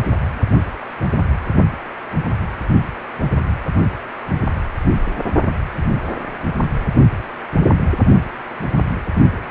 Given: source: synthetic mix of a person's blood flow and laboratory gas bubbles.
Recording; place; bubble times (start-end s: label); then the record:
Doppler ultrasound of blood flow; precordium
9.34-9.40 s: bubbles
From the record:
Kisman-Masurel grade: 221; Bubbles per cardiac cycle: several, 3 to 8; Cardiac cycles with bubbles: 10 to 50%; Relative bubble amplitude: barely perceptible (0.100 to 0.250); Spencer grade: 2 (many but less than half of the cardiac periods contain bubble signals, singularly or in groups); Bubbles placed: only in the low amplitude regions of the cardiac cycle